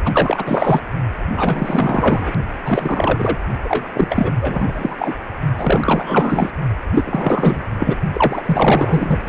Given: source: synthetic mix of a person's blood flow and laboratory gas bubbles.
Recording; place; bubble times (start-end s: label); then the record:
Doppler ultrasound of blood flow; precordium
0.04-0.81 s: bubbles
1.30-2.32 s: bubbles
2.64-3.39 s: bubbles
3.64-4.72 s: bubbles
4.75-5.13 s: bubbles
5.56-6.50 s: bubbles
6.94-7.63 s: bubbles
7.78-7.97 s: bubbles
8.13-9.20 s: bubbles
9.25-9.29 s: bubbles
From the record:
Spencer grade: 4 (maximum detectable bubble signal sounding continuously throughout systole and diastole of every cardiac period, and overriding the amplitude of the normal cardiac signals); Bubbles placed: only in the low amplitude regions of the cardiac cycle